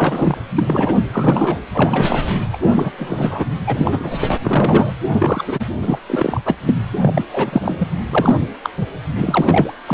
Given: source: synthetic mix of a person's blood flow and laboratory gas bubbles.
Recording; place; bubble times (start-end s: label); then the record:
Doppler ultrasound of blood flow; precordium
0.00-0.38 s: bubbles
0.56-1.02 s: bubbles
1.11-1.60 s: bubbles
1.73-2.26 s: bubbles
2.53-2.58 s: bubbles
2.60-2.91 s: bubbles
2.98-3.46 s: bubbles
3.67-4.18 s: bubbles
4.21-4.38 s: bubbles
4.43-4.93 s: bubbles
5.12-5.65 s: bubbles
5.81-5.98 s: bubbles
6.06-6.41 s: bubbles
6.45-6.56 s: bubbles
6.66-6.75 s: bubbles
7.01-7.25 s: bubbles
7.31-7.88 s: bubbles
8.11-8.48 s: bubbles
8.63-8.70 s: bubbles
8.81-8.89 s: bubbles
9.16-9.72 s: bubbles
9.88-9.94 s: bubbles
From the record:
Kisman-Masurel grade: 333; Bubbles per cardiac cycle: rolling drumbeat, 9 or more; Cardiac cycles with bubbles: 50 to 99%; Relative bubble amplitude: loud (0.450 to 0.775); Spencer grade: 3 (all of the cardiac periods contain showers or single bubble signals, but not dominating or overriding the cardiac motion signals); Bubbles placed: anywhere in the cardiac cycle